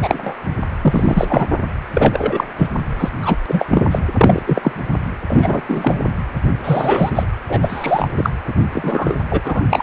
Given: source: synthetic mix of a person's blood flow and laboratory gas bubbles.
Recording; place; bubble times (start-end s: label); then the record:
Doppler ultrasound of blood flow; precordium
0.00-0.34 s: bubbles
0.81-1.47 s: bubbles
1.94-2.44 s: bubbles
2.58-2.67 s: bubbles
2.99-3.09 s: bubbles
3.21-3.38 s: bubbles
3.48-3.86 s: bubbles
3.91-3.99 s: bubbles
4.17-4.43 s: bubbles
4.46-4.72 s: bubbles
5.28-5.61 s: bubbles
5.68-5.99 s: bubbles
6.64-7.10 s: bubbles
7.15-7.24 s: bubbles
7.48-8.09 s: bubbles
8.17-8.30 s: bubbles
8.47-8.53 s: bubbles
8.73-9.16 s: bubbles
9.30-9.41 s: bubbles
9.44-9.63 s: bubbles
9.70-9.82 s: bubbles
From the record:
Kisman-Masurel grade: 243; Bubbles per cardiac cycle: several, 3 to 8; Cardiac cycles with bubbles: 100%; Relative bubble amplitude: loud (0.450 to 0.775); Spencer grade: 3 (all of the cardiac periods contain showers or single bubble signals, but not dominating or overriding the cardiac motion signals); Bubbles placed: anywhere in the cardiac cycle